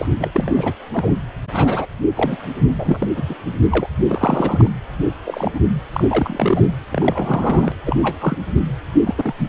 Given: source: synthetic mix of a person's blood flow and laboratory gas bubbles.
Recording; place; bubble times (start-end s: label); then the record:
Doppler ultrasound of blood flow; precordium
0.00-0.07 s: bubbles
0.19-0.29 s: bubbles
0.34-0.52 s: bubbles
0.54-0.74 s: bubbles
0.93-1.14 s: bubbles
1.53-1.86 s: bubbles
2.15-2.37 s: bubbles
2.72-3.08 s: bubbles
3.17-3.23 s: bubbles
3.29-3.34 s: bubbles
3.70-3.86 s: bubbles
4.08-4.70 s: bubbles
5.25-5.50 s: bubbles
5.54-5.59 s: bubbles
5.92-6.74 s: bubbles
6.91-7.72 s: bubbles
7.86-7.96 s: bubbles
8.02-8.17 s: bubbles
8.20-8.36 s: bubbles
9.06-9.15 s: bubbles
9.17-9.33 s: bubbles
9.40-9.49 s: bubbles
From the record:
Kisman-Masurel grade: 232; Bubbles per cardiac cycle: several, 3 to 8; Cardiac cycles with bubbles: 50 to 99%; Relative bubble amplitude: moderate (0.250 to 0.450); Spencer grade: 3 (all of the cardiac periods contain showers or single bubble signals, but not dominating or overriding the cardiac motion signals); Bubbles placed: anywhere in the cardiac cycle